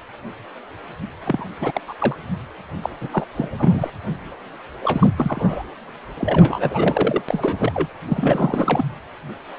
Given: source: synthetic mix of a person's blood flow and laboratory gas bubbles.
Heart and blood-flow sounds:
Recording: Doppler ultrasound of blood flow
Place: precordium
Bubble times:
1.24-1.45 s: bubbles
1.61-1.81 s: bubbles
1.86-1.95 s: bubbles
1.99-2.16 s: bubbles
2.82-2.90 s: bubbles
3.00-3.09 s: bubbles
3.12-3.25 s: bubbles
3.36-3.48 s: bubbles
3.58-3.90 s: bubbles
4.83-5.10 s: bubbles
5.17-5.64 s: bubbles
6.17-7.22 s: bubbles
7.29-7.89 s: bubbles
8.08-8.85 s: bubbles
From the record:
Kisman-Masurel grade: 332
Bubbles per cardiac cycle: rolling drumbeat, 9 or more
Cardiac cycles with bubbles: 50 to 99%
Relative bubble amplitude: moderate (0.250 to 0.450)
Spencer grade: 3 (all of the cardiac periods contain showers or single bubble signals, but not dominating or overriding the cardiac motion signals)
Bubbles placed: anywhere in the cardiac cycle

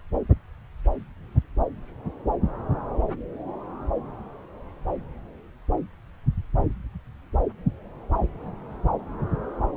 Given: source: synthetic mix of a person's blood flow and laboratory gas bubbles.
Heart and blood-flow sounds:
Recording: Doppler ultrasound of blood flow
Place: subclavian vein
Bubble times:
no bubbles
From the record:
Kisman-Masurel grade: 000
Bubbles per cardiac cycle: 0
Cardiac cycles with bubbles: 0%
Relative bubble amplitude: no bubbles discernible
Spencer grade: 0 (complete lack of bubble signals)

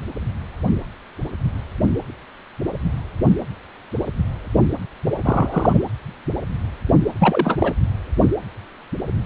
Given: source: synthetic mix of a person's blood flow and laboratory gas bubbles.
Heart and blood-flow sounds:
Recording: Doppler ultrasound of blood flow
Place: precordium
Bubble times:
5.24-5.79 s: bubbles
7.20-7.74 s: bubbles
From the record:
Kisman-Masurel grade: 222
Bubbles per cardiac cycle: several, 3 to 8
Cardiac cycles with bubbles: 10 to 50%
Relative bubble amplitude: moderate (0.250 to 0.450)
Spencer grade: 2 (many but less than half of the cardiac periods contain bubble signals, singularly or in groups)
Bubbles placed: anywhere in the cardiac cycle

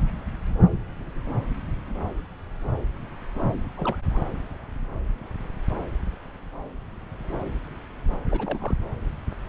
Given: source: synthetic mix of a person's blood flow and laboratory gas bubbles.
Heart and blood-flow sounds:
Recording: Doppler ultrasound of blood flow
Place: subclavian vein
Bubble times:
3.77-3.96 s: bubbles
4.13-4.18 s: bubbles
8.29-8.78 s: bubbles
From the record:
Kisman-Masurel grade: 211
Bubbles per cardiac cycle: several, 3 to 8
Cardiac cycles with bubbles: 1 to 10%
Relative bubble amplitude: barely perceptible (0.100 to 0.250)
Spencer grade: 1 (occasional bubble signal discernible with the cardiac motion signal, with majority of cardiac periods free of bubbles)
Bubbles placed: anywhere in the cardiac cycle

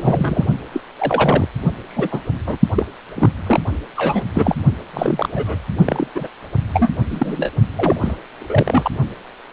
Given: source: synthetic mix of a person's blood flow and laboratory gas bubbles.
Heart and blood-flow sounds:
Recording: Doppler ultrasound of blood flow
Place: precordium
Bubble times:
0.00-0.45 s: bubbles
0.72-0.81 s: bubbles
0.98-1.48 s: bubbles
1.89-2.20 s: bubbles
2.46-2.57 s: bubbles
2.75-2.84 s: bubbles
3.16-3.32 s: bubbles
3.46-3.59 s: bubbles
3.96-4.23 s: bubbles
4.35-4.56 s: bubbles
4.93-5.29 s: bubbles
5.35-5.62 s: bubbles
5.85-6.07 s: bubbles
6.15-6.28 s: bubbles
6.73-6.90 s: bubbles
7.10-7.50 s: bubbles
7.75-8.16 s: bubbles
8.39-8.89 s: bubbles
From the record:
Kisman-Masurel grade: 242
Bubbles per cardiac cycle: several, 3 to 8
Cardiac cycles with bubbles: 100%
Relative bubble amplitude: moderate (0.250 to 0.450)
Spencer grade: 3 (all of the cardiac periods contain showers or single bubble signals, but not dominating or overriding the cardiac motion signals)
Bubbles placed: only in the low amplitude regions of the cardiac cycle

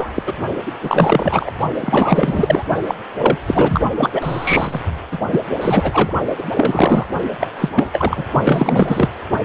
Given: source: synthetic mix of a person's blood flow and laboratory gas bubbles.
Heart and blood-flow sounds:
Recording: Doppler ultrasound of blood flow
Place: precordium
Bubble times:
0.00-0.22 s: bubbles
0.26-0.33 s: bubbles
0.66-0.72 s: bubbles
0.81-1.50 s: bubbles
1.80-2.65 s: bubbles
2.88-2.96 s: bubbles
3.17-3.38 s: bubbles
3.47-3.81 s: bubbles
3.96-4.81 s: bubbles
5.11-5.20 s: bubbles
5.31-5.40 s: bubbles
5.61-6.13 s: bubbles
6.38-6.43 s: bubbles
6.55-7.06 s: bubbles
7.39-7.47 s: bubbles
7.58-7.69 s: bubbles
7.75-7.90 s: bubbles
7.92-8.25 s: bubbles
8.44-9.09 s: bubbles
From the record:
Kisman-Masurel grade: 343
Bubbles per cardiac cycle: rolling drumbeat, 9 or more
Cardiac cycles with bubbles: 100%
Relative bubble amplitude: loud (0.450 to 0.775)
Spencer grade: 3 (all of the cardiac periods contain showers or single bubble signals, but not dominating or overriding the cardiac motion signals)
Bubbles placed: only in the low amplitude regions of the cardiac cycle

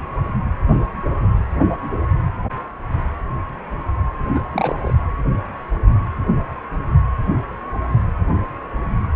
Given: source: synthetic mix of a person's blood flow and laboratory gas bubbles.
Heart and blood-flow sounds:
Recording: Doppler ultrasound of blood flow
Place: precordium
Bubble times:
4.33-4.40 s: bubbles
4.52-4.94 s: bubbles
From the record:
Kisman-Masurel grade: 212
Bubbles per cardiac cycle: several, 3 to 8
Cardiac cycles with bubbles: 1 to 10%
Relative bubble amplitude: moderate (0.250 to 0.450)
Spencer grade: 1 (occasional bubble signal discernible with the cardiac motion signal, with majority of cardiac periods free of bubbles)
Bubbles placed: anywhere in the cardiac cycle

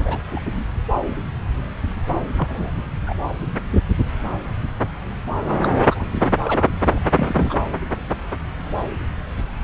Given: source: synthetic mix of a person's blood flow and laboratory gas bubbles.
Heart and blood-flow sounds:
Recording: Doppler ultrasound of blood flow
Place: subclavian vein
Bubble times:
0.00-0.18 s: bubbles
0.36-0.65 s: bubbles
2.37-2.71 s: bubbles
3.06-3.16 s: bubbles
5.62-5.68 s: bubbles
5.90-6.05 s: bubbles
6.39-6.65 s: bubbles
6.91-7.12 s: bubbles
7.15-7.58 s: bubbles
From the record:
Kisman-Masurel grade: 222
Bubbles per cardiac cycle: several, 3 to 8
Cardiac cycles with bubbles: 10 to 50%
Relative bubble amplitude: moderate (0.250 to 0.450)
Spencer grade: 2 (many but less than half of the cardiac periods contain bubble signals, singularly or in groups)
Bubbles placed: anywhere in the cardiac cycle

